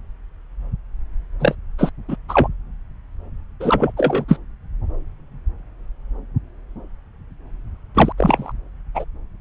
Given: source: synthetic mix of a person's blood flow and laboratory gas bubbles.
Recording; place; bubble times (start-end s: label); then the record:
Doppler ultrasound of blood flow; subclavian vein
1.40-1.55 s: bubbles
1.78-1.92 s: bubbles
2.08-2.16 s: bubbles
2.28-2.48 s: bubbles
3.60-3.92 s: bubbles
3.96-4.25 s: bubbles
4.27-4.38 s: bubbles
7.94-8.12 s: bubbles
8.17-8.52 s: bubbles
8.95-9.05 s: bubbles
From the record:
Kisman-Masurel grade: 223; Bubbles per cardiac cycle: several, 3 to 8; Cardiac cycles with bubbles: 10 to 50%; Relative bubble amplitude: loud (0.450 to 0.775); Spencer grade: 2 (many but less than half of the cardiac periods contain bubble signals, singularly or in groups); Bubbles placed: anywhere in the cardiac cycle